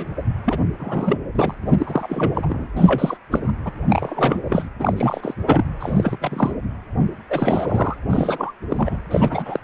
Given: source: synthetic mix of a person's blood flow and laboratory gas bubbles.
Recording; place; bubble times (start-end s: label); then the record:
Doppler ultrasound of blood flow; precordium
0.00-0.07 s: bubbles
0.45-0.59 s: bubbles
0.79-1.19 s: bubbles
1.34-1.54 s: bubbles
1.62-2.32 s: bubbles
2.34-2.68 s: bubbles
2.76-3.17 s: bubbles
3.30-3.52 s: bubbles
3.65-3.72 s: bubbles
3.88-4.40 s: bubbles
4.44-4.69 s: bubbles
4.79-5.34 s: bubbles
5.46-5.64 s: bubbles
5.79-6.17 s: bubbles
6.21-6.55 s: bubbles
7.29-7.96 s: bubbles
8.10-8.53 s: bubbles
8.69-8.97 s: bubbles
9.11-9.60 s: bubbles
From the record:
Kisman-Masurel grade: 343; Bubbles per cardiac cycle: rolling drumbeat, 9 or more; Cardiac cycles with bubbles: 100%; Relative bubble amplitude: loud (0.450 to 0.775); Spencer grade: 3 (all of the cardiac periods contain showers or single bubble signals, but not dominating or overriding the cardiac motion signals); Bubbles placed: anywhere in the cardiac cycle